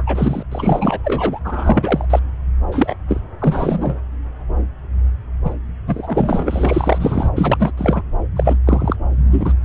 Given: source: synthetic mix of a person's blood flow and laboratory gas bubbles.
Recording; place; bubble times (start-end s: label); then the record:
Doppler ultrasound of blood flow; subclavian vein
0.00-0.04 s: bubbles
0.06-0.43 s: bubbles
0.51-1.00 s: bubbles
1.03-1.41 s: bubbles
1.44-2.05 s: bubbles
2.10-2.19 s: bubbles
2.71-2.96 s: bubbles
3.08-3.21 s: bubbles
3.39-3.99 s: bubbles
5.45-5.54 s: bubbles
5.85-7.30 s: bubbles
7.35-7.74 s: bubbles
7.77-8.03 s: bubbles
8.36-8.57 s: bubbles
8.66-8.96 s: bubbles
9.31-9.53 s: bubbles
From the record:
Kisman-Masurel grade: 333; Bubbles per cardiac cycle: rolling drumbeat, 9 or more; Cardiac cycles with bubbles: 50 to 99%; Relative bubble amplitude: loud (0.450 to 0.775); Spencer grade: 3 (all of the cardiac periods contain showers or single bubble signals, but not dominating or overriding the cardiac motion signals); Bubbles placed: anywhere in the cardiac cycle